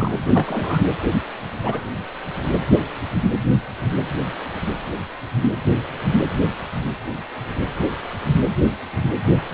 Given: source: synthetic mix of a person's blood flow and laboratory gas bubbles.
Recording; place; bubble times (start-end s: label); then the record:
Doppler ultrasound of blood flow; precordium
0.00-0.12 s: bubbles
0.34-0.78 s: bubbles
1.62-1.83 s: bubbles
From the record:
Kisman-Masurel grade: 122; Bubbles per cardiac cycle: 1 to 2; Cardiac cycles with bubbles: 10 to 50%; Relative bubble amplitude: moderate (0.250 to 0.450); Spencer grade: 2 (many but less than half of the cardiac periods contain bubble signals, singularly or in groups); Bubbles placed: anywhere in the cardiac cycle